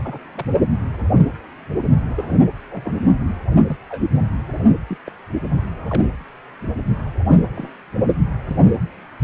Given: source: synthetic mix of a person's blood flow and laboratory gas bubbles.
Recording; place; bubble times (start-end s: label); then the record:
Doppler ultrasound of blood flow; precordium
0.03-0.18 s: bubbles
0.35-0.44 s: bubbles
2.08-2.44 s: bubbles
2.70-3.04 s: bubbles
3.69-3.76 s: bubbles
3.90-4.05 s: bubbles
4.89-4.98 s: bubbles
5.05-5.12 s: bubbles
5.90-6.03 s: bubbles
7.55-7.69 s: bubbles
8.48-8.56 s: bubbles
From the record:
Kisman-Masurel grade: 121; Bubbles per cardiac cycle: 1 to 2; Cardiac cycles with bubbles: 10 to 50%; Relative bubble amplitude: barely perceptible (0.100 to 0.250); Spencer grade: 2 (many but less than half of the cardiac periods contain bubble signals, singularly or in groups); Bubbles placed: anywhere in the cardiac cycle